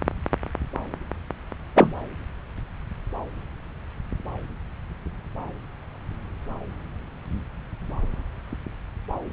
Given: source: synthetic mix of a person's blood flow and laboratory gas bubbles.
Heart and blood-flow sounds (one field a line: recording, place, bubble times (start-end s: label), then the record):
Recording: Doppler ultrasound of blood flow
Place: subclavian vein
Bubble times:
1.75-1.93 s: bubbles
From the record:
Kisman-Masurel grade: 113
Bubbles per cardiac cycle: 1 to 2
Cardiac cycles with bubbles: 1 to 10%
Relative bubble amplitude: loud (0.450 to 0.775)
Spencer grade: 1 (occasional bubble signal discernible with the cardiac motion signal, with majority of cardiac periods free of bubbles)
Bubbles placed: anywhere in the cardiac cycle